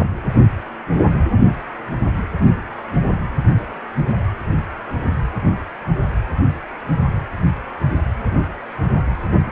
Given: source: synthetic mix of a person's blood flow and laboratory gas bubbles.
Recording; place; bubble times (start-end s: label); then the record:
Doppler ultrasound of blood flow; precordium
no bubbles
From the record:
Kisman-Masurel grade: 000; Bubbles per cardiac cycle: 0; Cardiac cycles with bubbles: 0%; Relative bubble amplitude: no bubbles discernible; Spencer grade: 0 (complete lack of bubble signals)